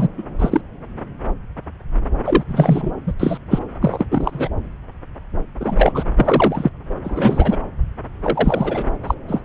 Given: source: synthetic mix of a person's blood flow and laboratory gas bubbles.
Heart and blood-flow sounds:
Doppler ultrasound of blood flow; subclavian vein
0.00-0.08 s: bubbles
0.18-0.23 s: bubbles
0.39-0.61 s: bubbles
2.25-2.43 s: bubbles
2.47-2.93 s: bubbles
3.07-3.14 s: bubbles
3.20-3.38 s: bubbles
3.50-3.59 s: bubbles
3.81-4.06 s: bubbles
4.10-4.48 s: bubbles
5.60-6.04 s: bubbles
6.17-6.70 s: bubbles
7.04-7.56 s: bubbles
8.22-8.83 s: bubbles
9.03-9.14 s: bubbles
9.28-9.42 s: bubbles
From the record:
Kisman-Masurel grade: 233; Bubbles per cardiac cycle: several, 3 to 8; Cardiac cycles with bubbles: 50 to 99%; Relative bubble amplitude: loud (0.450 to 0.775); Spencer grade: 3 (all of the cardiac periods contain showers or single bubble signals, but not dominating or overriding the cardiac motion signals); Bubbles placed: anywhere in the cardiac cycle

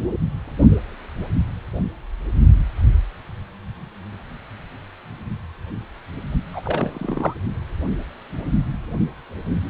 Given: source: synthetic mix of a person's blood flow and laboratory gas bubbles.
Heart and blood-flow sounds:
Doppler ultrasound of blood flow; precordium
6.53-7.34 s: bubbles
From the record:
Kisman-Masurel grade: 212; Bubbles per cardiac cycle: several, 3 to 8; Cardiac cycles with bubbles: 1 to 10%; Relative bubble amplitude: moderate (0.250 to 0.450); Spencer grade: 1 (occasional bubble signal discernible with the cardiac motion signal, with majority of cardiac periods free of bubbles); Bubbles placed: only in the low amplitude regions of the cardiac cycle

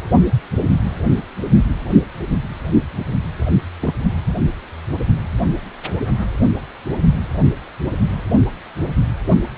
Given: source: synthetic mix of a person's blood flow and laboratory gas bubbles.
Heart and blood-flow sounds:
Doppler ultrasound of blood flow; precordium
3.80-3.94 s: bubbles
From the record:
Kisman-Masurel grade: 111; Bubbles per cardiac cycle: 1 to 2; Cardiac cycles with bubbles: 1 to 10%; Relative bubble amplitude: barely perceptible (0.100 to 0.250); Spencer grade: 1 (occasional bubble signal discernible with the cardiac motion signal, with majority of cardiac periods free of bubbles); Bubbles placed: only in the low amplitude regions of the cardiac cycle

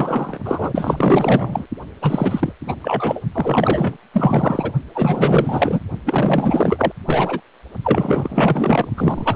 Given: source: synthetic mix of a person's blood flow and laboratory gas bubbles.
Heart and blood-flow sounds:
Doppler ultrasound of blood flow; precordium
0.00-0.38 s: bubbles
0.44-1.66 s: bubbles
2.01-2.52 s: bubbles
2.66-2.75 s: bubbles
2.81-3.21 s: bubbles
3.32-3.97 s: bubbles
4.13-4.72 s: bubbles
4.95-5.80 s: bubbles
6.06-6.93 s: bubbles
7.07-7.41 s: bubbles
7.83-8.88 s: bubbles
8.96-9.36 s: bubbles
From the record:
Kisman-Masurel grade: 444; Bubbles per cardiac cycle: continuous sound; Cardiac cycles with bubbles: 100%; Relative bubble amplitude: maximal (0.775 to 0.999); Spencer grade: 4 (maximum detectable bubble signal sounding continuously throughout systole and diastole of every cardiac period, and overriding the amplitude of the normal cardiac signals); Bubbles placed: only in the low amplitude regions of the cardiac cycle

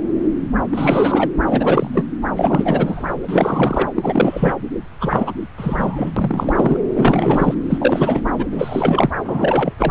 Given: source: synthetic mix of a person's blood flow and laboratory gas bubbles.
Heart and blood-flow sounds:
Doppler ultrasound of blood flow; subclavian vein
0.70-1.29 s: bubbles
1.46-1.89 s: bubbles
1.93-2.05 s: bubbles
2.35-3.15 s: bubbles
3.29-3.88 s: bubbles
3.96-4.54 s: bubbles
5.00-5.32 s: bubbles
5.57-6.09 s: bubbles
6.16-6.76 s: bubbles
6.94-7.54 s: bubbles
7.69-8.21 s: bubbles
8.38-8.46 s: bubbles
8.51-9.11 s: bubbles
9.27-9.73 s: bubbles
9.79-9.91 s: bubbles
From the record:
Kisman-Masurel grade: 343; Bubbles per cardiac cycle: rolling drumbeat, 9 or more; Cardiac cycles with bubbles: 100%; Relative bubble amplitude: loud (0.450 to 0.775); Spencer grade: 3 (all of the cardiac periods contain showers or single bubble signals, but not dominating or overriding the cardiac motion signals); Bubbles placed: anywhere in the cardiac cycle

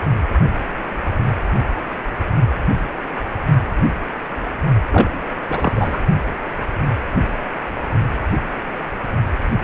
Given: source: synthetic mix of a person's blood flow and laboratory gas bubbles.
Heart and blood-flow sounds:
Doppler ultrasound of blood flow; precordium
4.92-5.24 s: bubbles
5.50-6.03 s: bubbles
From the record:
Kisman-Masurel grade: 213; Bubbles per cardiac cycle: several, 3 to 8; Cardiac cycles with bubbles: 1 to 10%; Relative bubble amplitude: loud (0.450 to 0.775); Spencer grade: 1 (occasional bubble signal discernible with the cardiac motion signal, with majority of cardiac periods free of bubbles); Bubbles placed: only in the low amplitude regions of the cardiac cycle

